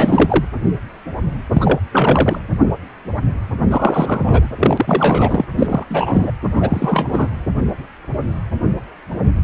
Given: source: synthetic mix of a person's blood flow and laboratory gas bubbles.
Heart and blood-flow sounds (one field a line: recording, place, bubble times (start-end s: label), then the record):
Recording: Doppler ultrasound of blood flow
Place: precordium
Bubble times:
0.00-0.45 s: bubbles
1.53-1.79 s: bubbles
1.92-2.39 s: bubbles
3.69-4.48 s: bubbles
4.58-5.45 s: bubbles
5.58-5.85 s: bubbles
5.90-6.32 s: bubbles
6.56-7.29 s: bubbles
From the record:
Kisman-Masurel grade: 333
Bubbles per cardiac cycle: rolling drumbeat, 9 or more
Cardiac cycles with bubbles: 50 to 99%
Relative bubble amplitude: loud (0.450 to 0.775)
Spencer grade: 3 (all of the cardiac periods contain showers or single bubble signals, but not dominating or overriding the cardiac motion signals)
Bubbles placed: anywhere in the cardiac cycle